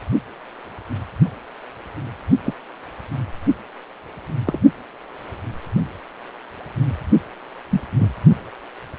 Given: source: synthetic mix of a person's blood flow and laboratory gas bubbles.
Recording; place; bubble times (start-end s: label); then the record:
Doppler ultrasound of blood flow; precordium
2.45-2.54 s: bubbles
4.45-4.60 s: bubbles
7.69-7.81 s: bubbles
7.99-8.08 s: bubbles
From the record:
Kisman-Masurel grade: 122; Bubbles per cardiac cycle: 1 to 2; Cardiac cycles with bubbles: 10 to 50%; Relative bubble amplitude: moderate (0.250 to 0.450); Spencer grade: 2 (many but less than half of the cardiac periods contain bubble signals, singularly or in groups); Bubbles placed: only in the low amplitude regions of the cardiac cycle